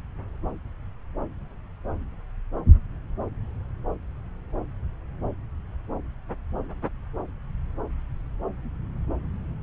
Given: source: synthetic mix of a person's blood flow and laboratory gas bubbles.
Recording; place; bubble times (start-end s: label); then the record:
Doppler ultrasound of blood flow; subclavian vein
no bubbles
From the record:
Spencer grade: 0 (complete lack of bubble signals)